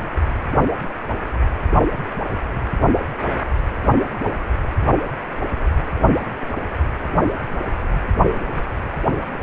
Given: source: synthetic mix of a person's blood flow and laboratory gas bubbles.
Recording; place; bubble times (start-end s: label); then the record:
Doppler ultrasound of blood flow; precordium
no bubbles
From the record:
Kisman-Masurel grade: 000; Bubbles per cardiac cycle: 0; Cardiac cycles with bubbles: 0%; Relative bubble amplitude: no bubbles discernible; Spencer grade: 0 (complete lack of bubble signals)